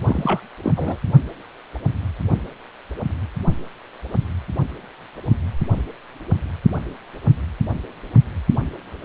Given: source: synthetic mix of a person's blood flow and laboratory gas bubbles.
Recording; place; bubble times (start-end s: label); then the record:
Doppler ultrasound of blood flow; precordium
0.00-0.40 s: bubbles
0.63-0.74 s: bubbles
0.76-0.97 s: bubbles
From the record:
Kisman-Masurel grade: 222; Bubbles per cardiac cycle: several, 3 to 8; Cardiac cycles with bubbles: 10 to 50%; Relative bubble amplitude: moderate (0.250 to 0.450); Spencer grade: 2 (many but less than half of the cardiac periods contain bubble signals, singularly or in groups); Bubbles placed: only in the low amplitude regions of the cardiac cycle